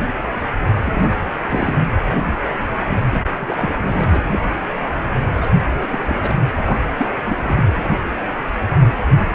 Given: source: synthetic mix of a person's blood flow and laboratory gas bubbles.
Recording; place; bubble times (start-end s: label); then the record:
Doppler ultrasound of blood flow; precordium
0.85-1.11 s: bubbles
1.48-1.76 s: bubbles
3.12-3.21 s: bubbles
3.40-3.74 s: bubbles
3.81-4.21 s: bubbles
4.31-4.40 s: bubbles
5.33-5.50 s: bubbles
5.72-5.86 s: bubbles
5.91-6.38 s: bubbles
6.64-6.79 s: bubbles
6.97-7.07 s: bubbles
7.25-7.36 s: bubbles
7.42-7.71 s: bubbles
From the record:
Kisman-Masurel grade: 232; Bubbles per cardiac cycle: several, 3 to 8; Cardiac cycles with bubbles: 50 to 99%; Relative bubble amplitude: moderate (0.250 to 0.450); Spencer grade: 3 (all of the cardiac periods contain showers or single bubble signals, but not dominating or overriding the cardiac motion signals); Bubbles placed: anywhere in the cardiac cycle